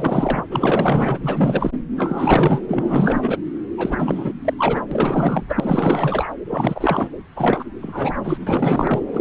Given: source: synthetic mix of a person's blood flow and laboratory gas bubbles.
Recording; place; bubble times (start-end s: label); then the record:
Doppler ultrasound of blood flow; subclavian vein
0.00-0.43 s: bubbles
0.51-1.18 s: bubbles
1.23-1.71 s: bubbles
1.97-2.60 s: bubbles
2.68-3.38 s: bubbles
3.76-4.33 s: bubbles
4.45-4.54 s: bubbles
4.58-4.83 s: bubbles
4.91-5.46 s: bubbles
5.49-6.28 s: bubbles
6.49-7.09 s: bubbles
7.36-7.65 s: bubbles
7.82-8.14 s: bubbles
8.23-8.38 s: bubbles
8.46-9.04 s: bubbles
9.11-9.21 s: bubbles
From the record:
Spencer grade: 4 (maximum detectable bubble signal sounding continuously throughout systole and diastole of every cardiac period, and overriding the amplitude of the normal cardiac signals); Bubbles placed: anywhere in the cardiac cycle